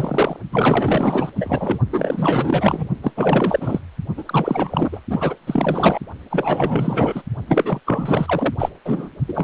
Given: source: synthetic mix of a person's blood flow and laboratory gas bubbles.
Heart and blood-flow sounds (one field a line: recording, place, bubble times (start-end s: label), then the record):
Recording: Doppler ultrasound of blood flow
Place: precordium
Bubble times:
0.00-0.37 s: bubbles
0.52-1.32 s: bubbles
1.35-1.78 s: bubbles
1.93-2.89 s: bubbles
3.02-3.12 s: bubbles
3.16-3.79 s: bubbles
4.17-5.00 s: bubbles
5.08-5.35 s: bubbles
5.46-5.99 s: bubbles
6.30-7.22 s: bubbles
7.47-7.80 s: bubbles
7.86-8.54 s: bubbles
8.59-8.71 s: bubbles
8.85-9.09 s: bubbles
9.27-9.44 s: bubbles
From the record:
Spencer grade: 4 (maximum detectable bubble signal sounding continuously throughout systole and diastole of every cardiac period, and overriding the amplitude of the normal cardiac signals)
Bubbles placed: only in the low amplitude regions of the cardiac cycle